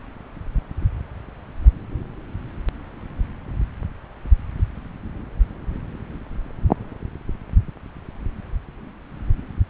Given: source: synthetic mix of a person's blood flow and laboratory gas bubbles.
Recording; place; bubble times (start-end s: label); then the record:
Doppler ultrasound of blood flow; subclavian vein
no bubbles
From the record:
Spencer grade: 0 (complete lack of bubble signals)